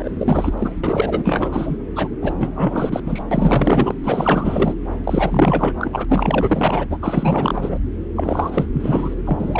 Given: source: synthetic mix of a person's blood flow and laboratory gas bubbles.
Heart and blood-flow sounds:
Doppler ultrasound of blood flow; subclavian vein
0.00-0.54 s: bubbles
0.57-0.72 s: bubbles
0.83-1.77 s: bubbles
1.95-2.08 s: bubbles
2.21-2.33 s: bubbles
2.38-3.00 s: bubbles
3.04-3.21 s: bubbles
3.31-3.95 s: bubbles
4.04-4.75 s: bubbles
5.04-6.05 s: bubbles
6.08-6.86 s: bubbles
6.89-6.98 s: bubbles
7.01-7.80 s: bubbles
8.15-8.67 s: bubbles
8.72-9.14 s: bubbles
9.25-9.60 s: bubbles
From the record:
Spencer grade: 4 (maximum detectable bubble signal sounding continuously throughout systole and diastole of every cardiac period, and overriding the amplitude of the normal cardiac signals); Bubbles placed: anywhere in the cardiac cycle

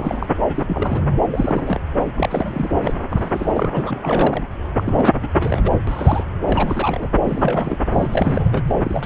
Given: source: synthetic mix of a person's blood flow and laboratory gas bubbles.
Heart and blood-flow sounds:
Doppler ultrasound of blood flow; subclavian vein
0.00-0.27 s: bubbles
0.48-0.64 s: bubbles
0.68-1.06 s: bubbles
1.26-1.80 s: bubbles
2.00-2.08 s: bubbles
2.17-2.71 s: bubbles
2.83-2.94 s: bubbles
3.10-4.42 s: bubbles
4.78-4.83 s: bubbles
4.86-5.12 s: bubbles
5.22-5.28 s: bubbles
5.36-5.79 s: bubbles
5.87-6.24 s: bubbles
6.44-7.08 s: bubbles
7.25-7.78 s: bubbles
7.91-8.62 s: bubbles
8.68-8.75 s: bubbles
8.84-9.06 s: bubbles
From the record:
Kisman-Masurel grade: 342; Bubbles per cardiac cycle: rolling drumbeat, 9 or more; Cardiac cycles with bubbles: 100%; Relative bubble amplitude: moderate (0.250 to 0.450); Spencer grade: 3 (all of the cardiac periods contain showers or single bubble signals, but not dominating or overriding the cardiac motion signals); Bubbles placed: anywhere in the cardiac cycle

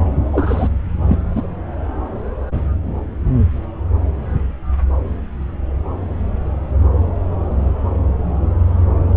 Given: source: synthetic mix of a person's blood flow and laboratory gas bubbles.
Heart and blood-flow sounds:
Doppler ultrasound of blood flow; subclavian vein
0.33-0.69 s: bubbles
1.08-1.18 s: bubbles
1.35-1.47 s: bubbles
From the record:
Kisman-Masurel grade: 213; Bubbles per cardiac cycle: several, 3 to 8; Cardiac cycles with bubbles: 1 to 10%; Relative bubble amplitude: loud (0.450 to 0.775); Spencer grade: 1 (occasional bubble signal discernible with the cardiac motion signal, with majority of cardiac periods free of bubbles); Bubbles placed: anywhere in the cardiac cycle

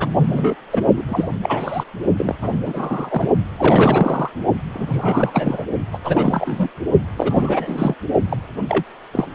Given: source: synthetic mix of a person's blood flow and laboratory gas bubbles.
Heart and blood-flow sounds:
Doppler ultrasound of blood flow; precordium
0.00-0.08 s: bubbles
0.18-0.55 s: bubbles
0.70-0.82 s: bubbles
0.96-1.02 s: bubbles
1.08-1.29 s: bubbles
1.43-1.84 s: bubbles
2.17-2.35 s: bubbles
2.41-2.62 s: bubbles
2.65-3.29 s: bubbles
3.58-4.29 s: bubbles
4.73-5.65 s: bubbles
5.92-5.98 s: bubbles
6.03-6.68 s: bubbles
7.16-7.95 s: bubbles
8.29-8.38 s: bubbles
8.68-8.83 s: bubbles
9.12-9.27 s: bubbles
From the record:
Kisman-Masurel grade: 332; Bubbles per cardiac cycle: rolling drumbeat, 9 or more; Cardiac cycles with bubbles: 50 to 99%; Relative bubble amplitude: moderate (0.250 to 0.450); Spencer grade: 3 (all of the cardiac periods contain showers or single bubble signals, but not dominating or overriding the cardiac motion signals); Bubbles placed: only in the low amplitude regions of the cardiac cycle

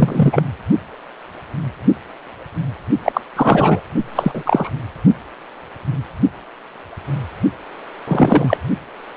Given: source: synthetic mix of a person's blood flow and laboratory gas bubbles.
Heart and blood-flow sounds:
Doppler ultrasound of blood flow; precordium
0.00-0.42 s: bubbles
3.02-3.21 s: bubbles
3.35-3.82 s: bubbles
4.15-4.32 s: bubbles
4.34-4.70 s: bubbles
8.07-8.57 s: bubbles
From the record:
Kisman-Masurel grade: 223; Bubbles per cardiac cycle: several, 3 to 8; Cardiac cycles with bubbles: 10 to 50%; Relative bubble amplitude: loud (0.450 to 0.775); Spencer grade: 2 (many but less than half of the cardiac periods contain bubble signals, singularly or in groups); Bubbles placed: only in the low amplitude regions of the cardiac cycle

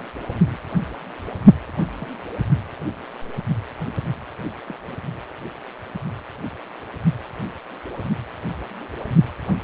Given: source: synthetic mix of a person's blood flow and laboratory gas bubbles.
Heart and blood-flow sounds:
Doppler ultrasound of blood flow; precordium
0.28-0.57 s: bubbles
1.99-2.11 s: bubbles
4.66-4.96 s: bubbles
From the record:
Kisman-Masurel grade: 121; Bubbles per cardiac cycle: 1 to 2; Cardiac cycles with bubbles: 10 to 50%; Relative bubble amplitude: barely perceptible (0.100 to 0.250); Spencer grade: 2 (many but less than half of the cardiac periods contain bubble signals, singularly or in groups); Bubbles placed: anywhere in the cardiac cycle

